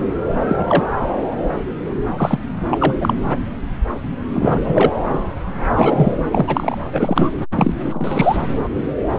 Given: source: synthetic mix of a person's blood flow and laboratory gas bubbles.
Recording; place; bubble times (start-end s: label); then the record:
Doppler ultrasound of blood flow; subclavian vein
0.47-0.85 s: bubbles
2.17-2.39 s: bubbles
2.70-2.94 s: bubbles
3.00-3.14 s: bubbles
4.34-4.91 s: bubbles
5.74-6.17 s: bubbles
6.31-6.78 s: bubbles
6.92-7.29 s: bubbles
7.55-7.79 s: bubbles
7.83-8.37 s: bubbles
From the record:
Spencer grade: 2 (many but less than half of the cardiac periods contain bubble signals, singularly or in groups); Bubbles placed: anywhere in the cardiac cycle